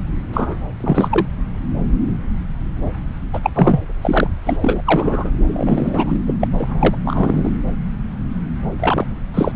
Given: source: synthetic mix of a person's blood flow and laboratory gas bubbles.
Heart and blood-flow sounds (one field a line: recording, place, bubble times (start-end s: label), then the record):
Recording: Doppler ultrasound of blood flow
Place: subclavian vein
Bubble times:
0.33-0.56 s: bubbles
0.80-1.25 s: bubbles
3.33-3.40 s: bubbles
3.43-3.51 s: bubbles
3.54-3.80 s: bubbles
4.01-4.29 s: bubbles
4.46-4.57 s: bubbles
4.61-4.82 s: bubbles
4.85-5.31 s: bubbles
5.47-6.22 s: bubbles
6.26-6.34 s: bubbles
6.40-6.47 s: bubbles
6.58-6.97 s: bubbles
7.04-7.50 s: bubbles
8.80-9.05 s: bubbles
9.34-9.52 s: bubbles
From the record:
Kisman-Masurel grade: 233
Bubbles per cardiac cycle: several, 3 to 8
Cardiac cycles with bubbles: 50 to 99%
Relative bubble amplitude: loud (0.450 to 0.775)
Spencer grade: 3 (all of the cardiac periods contain showers or single bubble signals, but not dominating or overriding the cardiac motion signals)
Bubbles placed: anywhere in the cardiac cycle